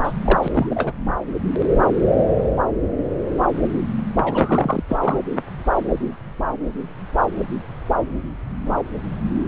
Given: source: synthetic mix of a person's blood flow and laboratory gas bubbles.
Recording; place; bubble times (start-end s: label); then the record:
Doppler ultrasound of blood flow; subclavian vein
0.03-0.13 s: bubbles
0.24-0.39 s: bubbles
0.42-0.48 s: bubbles
0.54-0.92 s: bubbles
4.24-4.82 s: bubbles
4.88-4.97 s: bubbles
5.01-5.22 s: bubbles
From the record:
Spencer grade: 2 (many but less than half of the cardiac periods contain bubble signals, singularly or in groups); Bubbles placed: anywhere in the cardiac cycle